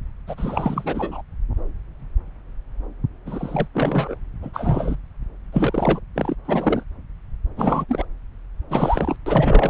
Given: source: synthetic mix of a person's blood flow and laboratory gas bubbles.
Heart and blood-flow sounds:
Doppler ultrasound of blood flow; subclavian vein
0.27-1.22 s: bubbles
3.26-3.67 s: bubbles
3.73-4.15 s: bubbles
4.42-4.97 s: bubbles
5.52-6.00 s: bubbles
6.15-6.36 s: bubbles
6.45-6.83 s: bubbles
7.56-7.85 s: bubbles
7.89-8.05 s: bubbles
8.69-9.16 s: bubbles
9.26-9.70 s: bubbles
From the record:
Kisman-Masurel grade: 332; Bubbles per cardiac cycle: rolling drumbeat, 9 or more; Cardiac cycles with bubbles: 50 to 99%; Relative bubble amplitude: moderate (0.250 to 0.450); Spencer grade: 3 (all of the cardiac periods contain showers or single bubble signals, but not dominating or overriding the cardiac motion signals); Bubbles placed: anywhere in the cardiac cycle

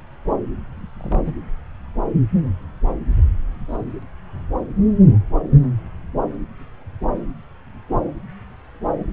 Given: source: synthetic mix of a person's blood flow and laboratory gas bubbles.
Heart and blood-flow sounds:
Doppler ultrasound of blood flow; subclavian vein
0.97-1.34 s: bubbles
3.69-3.78 s: bubbles
From the record:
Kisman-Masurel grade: 121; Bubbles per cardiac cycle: 1 to 2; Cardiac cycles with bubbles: 10 to 50%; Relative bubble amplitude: barely perceptible (0.100 to 0.250); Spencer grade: 2 (many but less than half of the cardiac periods contain bubble signals, singularly or in groups); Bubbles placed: anywhere in the cardiac cycle

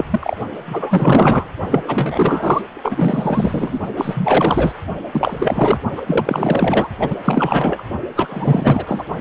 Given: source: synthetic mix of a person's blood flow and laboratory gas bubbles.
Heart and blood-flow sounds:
Doppler ultrasound of blood flow; precordium
0.00-0.05 s: bubbles
0.11-0.36 s: bubbles
0.65-1.49 s: bubbles
1.70-1.84 s: bubbles
1.87-2.61 s: bubbles
2.74-3.79 s: bubbles
3.96-4.72 s: bubbles
5.12-5.79 s: bubbles
5.96-6.02 s: bubbles
6.06-6.88 s: bubbles
6.99-7.17 s: bubbles
7.24-7.83 s: bubbles
8.15-9.04 s: bubbles
9.19-9.21 s: bubbles
From the record:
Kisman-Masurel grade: 444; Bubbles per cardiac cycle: continuous sound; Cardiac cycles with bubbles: 100%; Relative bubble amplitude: maximal (0.775 to 0.999); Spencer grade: 4 (maximum detectable bubble signal sounding continuously throughout systole and diastole of every cardiac period, and overriding the amplitude of the normal cardiac signals); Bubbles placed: only in the low amplitude regions of the cardiac cycle

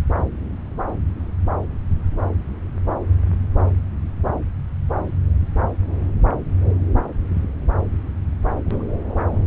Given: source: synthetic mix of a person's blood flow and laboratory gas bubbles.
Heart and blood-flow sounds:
Doppler ultrasound of blood flow; subclavian vein
8.66-8.91 s: bubbles
From the record:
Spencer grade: 2 (many but less than half of the cardiac periods contain bubble signals, singularly or in groups); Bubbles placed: anywhere in the cardiac cycle

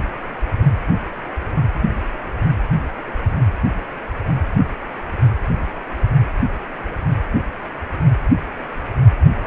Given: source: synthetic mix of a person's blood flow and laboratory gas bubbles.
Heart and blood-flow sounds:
Doppler ultrasound of blood flow; precordium
9.44-9.47 s: bubbles
From the record:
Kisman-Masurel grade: 112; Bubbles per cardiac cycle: 1 to 2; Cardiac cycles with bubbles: 1 to 10%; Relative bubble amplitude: moderate (0.250 to 0.450); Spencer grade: 1 (occasional bubble signal discernible with the cardiac motion signal, with majority of cardiac periods free of bubbles); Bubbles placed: anywhere in the cardiac cycle

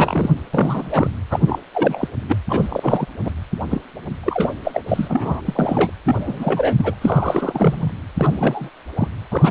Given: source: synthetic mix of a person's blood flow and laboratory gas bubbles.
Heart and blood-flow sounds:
Doppler ultrasound of blood flow; precordium
0.00-0.30 s: bubbles
0.53-1.10 s: bubbles
1.30-1.40 s: bubbles
1.46-1.59 s: bubbles
1.74-2.08 s: bubbles
2.28-2.36 s: bubbles
2.48-3.06 s: bubbles
3.24-3.31 s: bubbles
3.71-3.81 s: bubbles
4.23-4.56 s: bubbles
4.63-4.83 s: bubbles
4.88-5.42 s: bubbles
5.46-5.89 s: bubbles
6.04-6.95 s: bubbles
7.01-7.91 s: bubbles
8.17-8.70 s: bubbles
8.96-9.07 s: bubbles
9.31-9.51 s: bubbles
From the record:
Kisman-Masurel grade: 343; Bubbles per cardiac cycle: rolling drumbeat, 9 or more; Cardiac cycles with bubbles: 100%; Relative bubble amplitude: loud (0.450 to 0.775); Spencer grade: 3 (all of the cardiac periods contain showers or single bubble signals, but not dominating or overriding the cardiac motion signals); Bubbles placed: anywhere in the cardiac cycle

